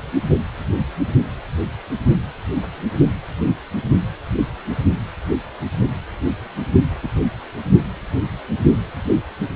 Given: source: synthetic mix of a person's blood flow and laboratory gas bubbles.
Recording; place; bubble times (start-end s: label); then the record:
Doppler ultrasound of blood flow; precordium
7.02-7.08 s: bubbles
From the record:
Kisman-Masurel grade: 122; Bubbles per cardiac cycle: 1 to 2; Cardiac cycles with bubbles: 10 to 50%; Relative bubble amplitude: moderate (0.250 to 0.450); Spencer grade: 2 (many but less than half of the cardiac periods contain bubble signals, singularly or in groups); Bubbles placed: only in the low amplitude regions of the cardiac cycle